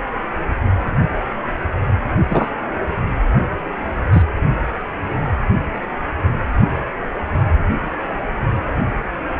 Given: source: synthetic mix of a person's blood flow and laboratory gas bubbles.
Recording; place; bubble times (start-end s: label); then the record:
Doppler ultrasound of blood flow; precordium
2.29-2.47 s: bubbles
4.12-4.23 s: bubbles
From the record:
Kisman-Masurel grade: 123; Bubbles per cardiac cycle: 1 to 2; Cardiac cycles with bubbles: 10 to 50%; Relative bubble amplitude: loud (0.450 to 0.775); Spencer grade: 2 (many but less than half of the cardiac periods contain bubble signals, singularly or in groups); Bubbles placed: only in the low amplitude regions of the cardiac cycle